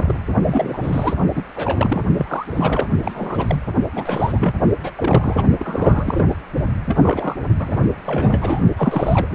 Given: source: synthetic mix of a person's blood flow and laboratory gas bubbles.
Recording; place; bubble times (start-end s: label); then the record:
Doppler ultrasound of blood flow; precordium
0.00-0.15 s: bubbles
0.46-1.14 s: bubbles
1.35-1.42 s: bubbles
1.55-2.02 s: bubbles
2.17-2.88 s: bubbles
3.02-3.61 s: bubbles
3.95-4.54 s: bubbles
4.83-4.92 s: bubbles
4.96-5.46 s: bubbles
5.59-6.36 s: bubbles
6.86-7.36 s: bubbles
7.59-7.82 s: bubbles
8.04-8.61 s: bubbles
8.77-9.28 s: bubbles
9.30-9.35 s: bubbles
From the record:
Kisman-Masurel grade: 342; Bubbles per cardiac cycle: rolling drumbeat, 9 or more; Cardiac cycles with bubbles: 100%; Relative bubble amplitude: moderate (0.250 to 0.450); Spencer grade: 3 (all of the cardiac periods contain showers or single bubble signals, but not dominating or overriding the cardiac motion signals); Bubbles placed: only in the low amplitude regions of the cardiac cycle